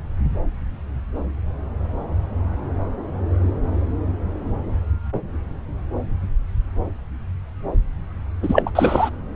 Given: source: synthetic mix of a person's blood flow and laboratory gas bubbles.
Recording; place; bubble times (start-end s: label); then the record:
Doppler ultrasound of blood flow; subclavian vein
8.42-8.62 s: bubbles
8.66-8.71 s: bubbles
8.75-9.10 s: bubbles
From the record:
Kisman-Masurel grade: 223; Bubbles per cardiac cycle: several, 3 to 8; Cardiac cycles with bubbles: 10 to 50%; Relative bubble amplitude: loud (0.450 to 0.775); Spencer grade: 2 (many but less than half of the cardiac periods contain bubble signals, singularly or in groups); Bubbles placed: anywhere in the cardiac cycle